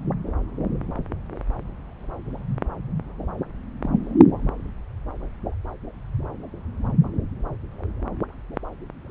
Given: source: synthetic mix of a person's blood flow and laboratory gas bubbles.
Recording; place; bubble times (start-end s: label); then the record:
Doppler ultrasound of blood flow; subclavian vein
3.83-3.88 s: bubbles
From the record:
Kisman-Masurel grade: 111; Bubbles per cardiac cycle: 1 to 2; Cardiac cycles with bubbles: 1 to 10%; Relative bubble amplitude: barely perceptible (0.100 to 0.250); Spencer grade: 1 (occasional bubble signal discernible with the cardiac motion signal, with majority of cardiac periods free of bubbles); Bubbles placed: anywhere in the cardiac cycle